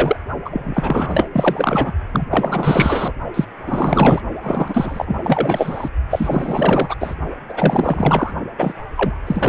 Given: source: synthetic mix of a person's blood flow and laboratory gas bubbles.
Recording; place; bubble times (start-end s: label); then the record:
Doppler ultrasound of blood flow; precordium
0.00-0.16 s: bubbles
0.45-1.29 s: bubbles
1.33-1.92 s: bubbles
2.12-2.25 s: bubbles
2.30-3.12 s: bubbles
3.34-3.45 s: bubbles
3.67-4.21 s: bubbles
4.43-5.17 s: bubbles
5.24-5.90 s: bubbles
6.10-6.96 s: bubbles
7.00-7.15 s: bubbles
7.48-8.33 s: bubbles
8.58-8.75 s: bubbles
8.95-9.18 s: bubbles
9.27-9.49 s: bubbles
From the record:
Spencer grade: 4 (maximum detectable bubble signal sounding continuously throughout systole and diastole of every cardiac period, and overriding the amplitude of the normal cardiac signals); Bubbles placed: only in the low amplitude regions of the cardiac cycle